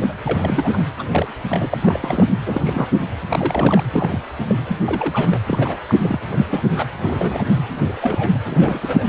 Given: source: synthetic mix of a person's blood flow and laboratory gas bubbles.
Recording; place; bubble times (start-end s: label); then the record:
Doppler ultrasound of blood flow; precordium
0.00-0.14 s: bubbles
0.22-0.83 s: bubbles
0.98-1.04 s: bubbles
1.12-1.33 s: bubbles
1.49-2.27 s: bubbles
2.46-2.86 s: bubbles
3.29-3.83 s: bubbles
3.91-4.21 s: bubbles
4.39-4.55 s: bubbles
4.67-4.76 s: bubbles
4.86-5.40 s: bubbles
5.47-5.77 s: bubbles
5.87-5.97 s: bubbles
6.02-6.20 s: bubbles
6.32-6.46 s: bubbles
6.50-6.62 s: bubbles
6.69-6.85 s: bubbles
7.03-7.44 s: bubbles
7.84-8.38 s: bubbles
8.45-9.06 s: bubbles
From the record:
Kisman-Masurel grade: 242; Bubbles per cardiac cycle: several, 3 to 8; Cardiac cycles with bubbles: 100%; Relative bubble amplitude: moderate (0.250 to 0.450); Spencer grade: 3 (all of the cardiac periods contain showers or single bubble signals, but not dominating or overriding the cardiac motion signals); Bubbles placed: anywhere in the cardiac cycle